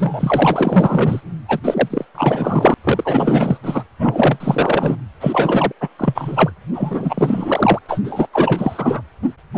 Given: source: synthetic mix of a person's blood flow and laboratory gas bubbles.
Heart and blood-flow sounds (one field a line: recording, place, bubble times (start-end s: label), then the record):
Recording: Doppler ultrasound of blood flow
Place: precordium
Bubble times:
0.00-1.21 s: bubbles
1.48-1.60 s: bubbles
1.64-2.05 s: bubbles
2.15-2.74 s: bubbles
2.83-3.58 s: bubbles
3.62-3.84 s: bubbles
3.98-4.97 s: bubbles
5.20-5.72 s: bubbles
5.80-5.89 s: bubbles
5.98-6.52 s: bubbles
6.73-7.80 s: bubbles
7.86-8.02 s: bubbles
8.04-8.27 s: bubbles
8.33-9.02 s: bubbles
9.54-9.58 s: bubbles
From the record:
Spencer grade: 4 (maximum detectable bubble signal sounding continuously throughout systole and diastole of every cardiac period, and overriding the amplitude of the normal cardiac signals)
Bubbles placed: anywhere in the cardiac cycle